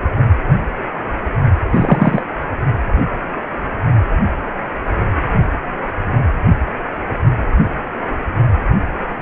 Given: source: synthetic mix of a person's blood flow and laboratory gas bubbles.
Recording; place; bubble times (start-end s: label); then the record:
Doppler ultrasound of blood flow; precordium
1.70-2.22 s: bubbles
From the record:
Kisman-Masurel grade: 123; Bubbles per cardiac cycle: 1 to 2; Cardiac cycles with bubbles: 10 to 50%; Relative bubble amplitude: loud (0.450 to 0.775); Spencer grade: 2 (many but less than half of the cardiac periods contain bubble signals, singularly or in groups); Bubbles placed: only in the low amplitude regions of the cardiac cycle